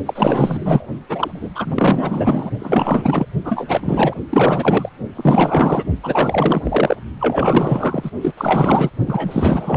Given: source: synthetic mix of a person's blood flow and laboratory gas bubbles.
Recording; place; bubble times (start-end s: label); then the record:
Doppler ultrasound of blood flow; precordium
0.06-0.87 s: bubbles
1.09-1.52 s: bubbles
1.54-2.50 s: bubbles
2.59-3.25 s: bubbles
3.44-4.13 s: bubbles
4.29-4.89 s: bubbles
5.16-5.84 s: bubbles
6.03-6.61 s: bubbles
6.63-6.96 s: bubbles
7.20-8.10 s: bubbles
8.21-8.32 s: bubbles
8.37-8.90 s: bubbles
9.06-9.77 s: bubbles
From the record:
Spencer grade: 4 (maximum detectable bubble signal sounding continuously throughout systole and diastole of every cardiac period, and overriding the amplitude of the normal cardiac signals); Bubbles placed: only in the low amplitude regions of the cardiac cycle